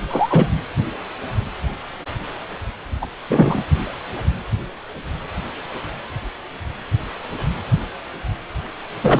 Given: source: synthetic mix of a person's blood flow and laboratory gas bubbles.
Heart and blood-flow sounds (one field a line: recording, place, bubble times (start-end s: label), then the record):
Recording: Doppler ultrasound of blood flow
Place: precordium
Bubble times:
0.10-0.61 s: bubbles
3.01-3.06 s: bubbles
3.29-3.64 s: bubbles
9.02-9.20 s: bubbles
From the record:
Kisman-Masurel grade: 223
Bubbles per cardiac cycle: several, 3 to 8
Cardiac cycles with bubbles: 10 to 50%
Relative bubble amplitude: loud (0.450 to 0.775)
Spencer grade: 2 (many but less than half of the cardiac periods contain bubble signals, singularly or in groups)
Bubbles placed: anywhere in the cardiac cycle